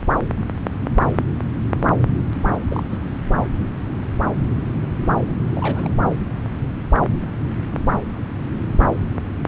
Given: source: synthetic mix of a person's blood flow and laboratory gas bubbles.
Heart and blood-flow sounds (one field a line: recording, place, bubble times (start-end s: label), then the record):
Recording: Doppler ultrasound of blood flow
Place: subclavian vein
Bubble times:
2.48-2.57 s: bubbles
2.69-2.98 s: bubbles
3.32-3.48 s: bubbles
5.51-5.98 s: bubbles
From the record:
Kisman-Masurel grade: 221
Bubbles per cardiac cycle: several, 3 to 8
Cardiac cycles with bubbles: 10 to 50%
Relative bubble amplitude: barely perceptible (0.100 to 0.250)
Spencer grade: 2 (many but less than half of the cardiac periods contain bubble signals, singularly or in groups)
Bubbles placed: anywhere in the cardiac cycle